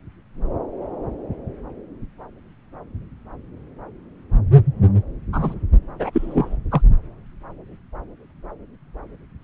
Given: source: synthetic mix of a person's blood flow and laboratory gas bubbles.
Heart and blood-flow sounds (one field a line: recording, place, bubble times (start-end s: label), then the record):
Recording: Doppler ultrasound of blood flow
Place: subclavian vein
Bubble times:
5.32-5.55 s: bubbles
5.99-6.10 s: bubbles
6.12-6.57 s: bubbles
6.71-6.81 s: bubbles
From the record:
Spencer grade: 2 (many but less than half of the cardiac periods contain bubble signals, singularly or in groups)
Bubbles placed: anywhere in the cardiac cycle